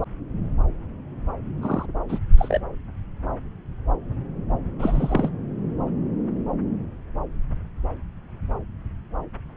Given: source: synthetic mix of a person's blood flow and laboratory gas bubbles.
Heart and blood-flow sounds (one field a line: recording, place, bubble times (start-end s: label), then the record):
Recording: Doppler ultrasound of blood flow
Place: subclavian vein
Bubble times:
1.61-1.86 s: bubbles
2.08-2.19 s: bubbles
2.38-2.60 s: bubbles
4.79-5.30 s: bubbles
From the record:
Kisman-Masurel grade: 222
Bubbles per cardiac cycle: several, 3 to 8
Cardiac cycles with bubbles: 10 to 50%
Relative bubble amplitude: moderate (0.250 to 0.450)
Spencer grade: 2 (many but less than half of the cardiac periods contain bubble signals, singularly or in groups)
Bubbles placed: anywhere in the cardiac cycle